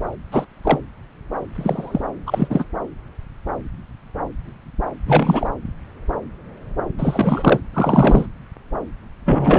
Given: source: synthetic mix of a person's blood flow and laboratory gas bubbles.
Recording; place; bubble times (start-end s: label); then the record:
Doppler ultrasound of blood flow; subclavian vein
0.32-0.45 s: bubbles
0.64-0.78 s: bubbles
1.54-2.01 s: bubbles
2.26-2.64 s: bubbles
5.06-5.47 s: bubbles
6.98-7.60 s: bubbles
7.73-8.26 s: bubbles
9.25-9.59 s: bubbles
From the record:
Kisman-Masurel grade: 223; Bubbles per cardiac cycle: several, 3 to 8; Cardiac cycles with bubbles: 10 to 50%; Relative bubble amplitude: loud (0.450 to 0.775); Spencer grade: 2 (many but less than half of the cardiac periods contain bubble signals, singularly or in groups); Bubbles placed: anywhere in the cardiac cycle